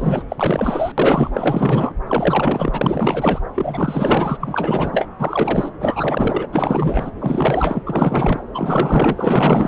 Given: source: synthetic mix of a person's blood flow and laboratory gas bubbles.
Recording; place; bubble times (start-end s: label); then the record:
Doppler ultrasound of blood flow; subclavian vein
0.00-0.22 s: bubbles
0.28-0.92 s: bubbles
0.97-1.31 s: bubbles
1.33-1.93 s: bubbles
2.06-3.40 s: bubbles
3.56-4.38 s: bubbles
4.40-5.08 s: bubbles
5.19-5.71 s: bubbles
5.80-6.47 s: bubbles
6.52-7.11 s: bubbles
7.19-7.83 s: bubbles
7.87-8.41 s: bubbles
8.54-9.68 s: bubbles
From the record:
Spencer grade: 4 (maximum detectable bubble signal sounding continuously throughout systole and diastole of every cardiac period, and overriding the amplitude of the normal cardiac signals); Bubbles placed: anywhere in the cardiac cycle